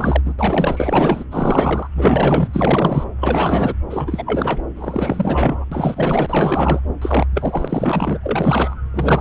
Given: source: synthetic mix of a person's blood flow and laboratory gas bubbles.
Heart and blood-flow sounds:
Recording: Doppler ultrasound of blood flow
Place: subclavian vein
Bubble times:
0.00-0.22 s: bubbles
0.25-0.34 s: bubbles
0.39-1.24 s: bubbles
1.31-1.88 s: bubbles
1.95-2.49 s: bubbles
2.53-3.09 s: bubbles
3.21-3.75 s: bubbles
3.90-4.62 s: bubbles
4.76-5.65 s: bubbles
5.71-6.81 s: bubbles
7.01-7.28 s: bubbles
7.34-8.19 s: bubbles
8.22-8.76 s: bubbles
8.94-9.21 s: bubbles
From the record:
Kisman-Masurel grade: 444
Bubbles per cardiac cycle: continuous sound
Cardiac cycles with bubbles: 100%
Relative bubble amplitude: maximal (0.775 to 0.999)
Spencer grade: 4 (maximum detectable bubble signal sounding continuously throughout systole and diastole of every cardiac period, and overriding the amplitude of the normal cardiac signals)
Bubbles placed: anywhere in the cardiac cycle

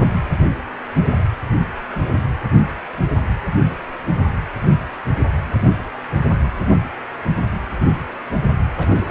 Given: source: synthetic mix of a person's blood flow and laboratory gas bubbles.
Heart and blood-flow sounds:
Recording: Doppler ultrasound of blood flow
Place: precordium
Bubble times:
8.77-9.11 s: bubbles
From the record:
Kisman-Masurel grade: 211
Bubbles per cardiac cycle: several, 3 to 8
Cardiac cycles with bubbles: 1 to 10%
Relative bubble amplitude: barely perceptible (0.100 to 0.250)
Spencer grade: 1 (occasional bubble signal discernible with the cardiac motion signal, with majority of cardiac periods free of bubbles)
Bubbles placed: anywhere in the cardiac cycle

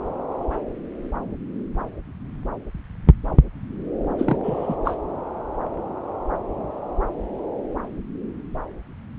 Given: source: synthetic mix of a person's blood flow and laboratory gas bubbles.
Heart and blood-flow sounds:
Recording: Doppler ultrasound of blood flow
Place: subclavian vein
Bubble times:
4.18-4.37 s: bubbles
4.43-4.76 s: bubbles
4.85-4.97 s: bubbles
From the record:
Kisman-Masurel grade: 212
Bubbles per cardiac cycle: several, 3 to 8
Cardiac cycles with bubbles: 1 to 10%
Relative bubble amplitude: moderate (0.250 to 0.450)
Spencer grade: 1 (occasional bubble signal discernible with the cardiac motion signal, with majority of cardiac periods free of bubbles)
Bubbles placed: anywhere in the cardiac cycle

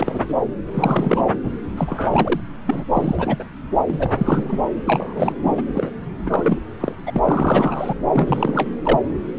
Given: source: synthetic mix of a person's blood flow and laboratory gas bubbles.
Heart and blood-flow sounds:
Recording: Doppler ultrasound of blood flow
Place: subclavian vein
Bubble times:
0.00-0.35 s: bubbles
0.74-1.22 s: bubbles
1.43-1.50 s: bubbles
1.77-2.40 s: bubbles
2.66-2.85 s: bubbles
2.94-3.44 s: bubbles
3.87-4.58 s: bubbles
4.85-5.62 s: bubbles
5.75-5.90 s: bubbles
6.26-6.58 s: bubbles
6.80-6.94 s: bubbles
7.06-7.19 s: bubbles
7.24-7.94 s: bubbles
8.12-8.70 s: bubbles
8.84-8.99 s: bubbles
From the record:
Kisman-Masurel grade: 332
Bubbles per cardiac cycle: rolling drumbeat, 9 or more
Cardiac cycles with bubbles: 50 to 99%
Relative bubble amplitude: moderate (0.250 to 0.450)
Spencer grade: 3 (all of the cardiac periods contain showers or single bubble signals, but not dominating or overriding the cardiac motion signals)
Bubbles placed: anywhere in the cardiac cycle

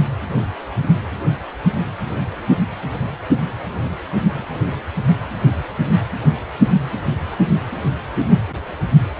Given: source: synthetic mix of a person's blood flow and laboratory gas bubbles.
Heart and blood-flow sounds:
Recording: Doppler ultrasound of blood flow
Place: precordium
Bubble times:
no bubbles
From the record:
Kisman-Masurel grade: 000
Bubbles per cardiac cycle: 0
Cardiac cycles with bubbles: 0%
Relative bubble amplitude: no bubbles discernible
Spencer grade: 0 (complete lack of bubble signals)

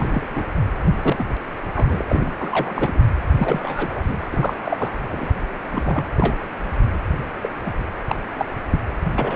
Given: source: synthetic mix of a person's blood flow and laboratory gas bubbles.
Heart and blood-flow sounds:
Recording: Doppler ultrasound of blood flow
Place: precordium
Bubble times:
0.00-0.44 s: bubbles
1.02-1.25 s: bubbles
1.75-2.05 s: bubbles
2.08-2.34 s: bubbles
2.41-3.05 s: bubbles
3.32-4.21 s: bubbles
4.32-4.57 s: bubbles
4.64-4.91 s: bubbles
5.06-5.30 s: bubbles
5.71-6.04 s: bubbles
6.17-6.35 s: bubbles
7.42-7.49 s: bubbles
7.65-7.72 s: bubbles
8.07-8.15 s: bubbles
8.36-8.46 s: bubbles
8.70-8.79 s: bubbles
9.18-9.36 s: bubbles
From the record:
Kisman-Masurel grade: 242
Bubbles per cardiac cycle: several, 3 to 8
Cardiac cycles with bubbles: 100%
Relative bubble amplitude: moderate (0.250 to 0.450)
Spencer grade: 3 (all of the cardiac periods contain showers or single bubble signals, but not dominating or overriding the cardiac motion signals)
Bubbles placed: anywhere in the cardiac cycle

